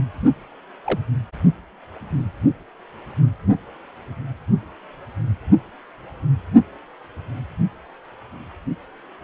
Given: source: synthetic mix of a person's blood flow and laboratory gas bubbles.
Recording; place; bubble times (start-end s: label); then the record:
Doppler ultrasound of blood flow; precordium
0.84-0.99 s: bubbles
From the record:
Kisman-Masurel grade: 112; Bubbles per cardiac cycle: 1 to 2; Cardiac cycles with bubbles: 1 to 10%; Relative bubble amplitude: moderate (0.250 to 0.450); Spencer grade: 1 (occasional bubble signal discernible with the cardiac motion signal, with majority of cardiac periods free of bubbles); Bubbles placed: only in the low amplitude regions of the cardiac cycle